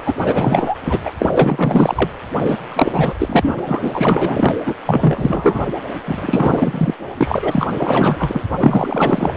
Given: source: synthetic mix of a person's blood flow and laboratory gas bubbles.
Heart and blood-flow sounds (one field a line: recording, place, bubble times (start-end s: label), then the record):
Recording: Doppler ultrasound of blood flow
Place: precordium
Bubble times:
0.04-0.14 s: bubbles
0.26-0.76 s: bubbles
0.82-1.01 s: bubbles
1.04-1.11 s: bubbles
1.19-2.09 s: bubbles
2.42-2.58 s: bubbles
2.68-3.15 s: bubbles
3.18-3.59 s: bubbles
3.66-4.54 s: bubbles
4.65-4.75 s: bubbles
4.85-5.65 s: bubbles
6.04-6.94 s: bubbles
7.17-7.39 s: bubbles
7.42-7.69 s: bubbles
7.74-8.41 s: bubbles
8.58-9.37 s: bubbles
From the record:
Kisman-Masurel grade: 444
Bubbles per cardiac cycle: continuous sound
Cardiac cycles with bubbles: 100%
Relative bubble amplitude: maximal (0.775 to 0.999)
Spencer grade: 4 (maximum detectable bubble signal sounding continuously throughout systole and diastole of every cardiac period, and overriding the amplitude of the normal cardiac signals)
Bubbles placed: anywhere in the cardiac cycle